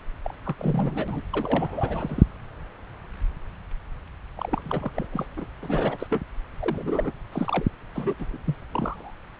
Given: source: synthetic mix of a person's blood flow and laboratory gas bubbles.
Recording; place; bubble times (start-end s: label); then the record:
Doppler ultrasound of blood flow; subclavian vein
0.24-0.33 s: bubbles
0.43-0.55 s: bubbles
0.58-1.21 s: bubbles
1.33-2.24 s: bubbles
4.36-4.61 s: bubbles
4.64-4.90 s: bubbles
4.94-5.07 s: bubbles
5.11-5.26 s: bubbles
5.36-5.46 s: bubbles
5.62-6.06 s: bubbles
6.10-6.23 s: bubbles
6.60-7.11 s: bubbles
7.32-7.65 s: bubbles
7.95-8.14 s: bubbles
8.18-8.25 s: bubbles
8.32-8.38 s: bubbles
8.46-8.58 s: bubbles
8.71-9.14 s: bubbles
From the record:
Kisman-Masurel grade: 332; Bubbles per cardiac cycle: rolling drumbeat, 9 or more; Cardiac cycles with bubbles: 50 to 99%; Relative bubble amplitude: moderate (0.250 to 0.450); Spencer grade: 3 (all of the cardiac periods contain showers or single bubble signals, but not dominating or overriding the cardiac motion signals); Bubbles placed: anywhere in the cardiac cycle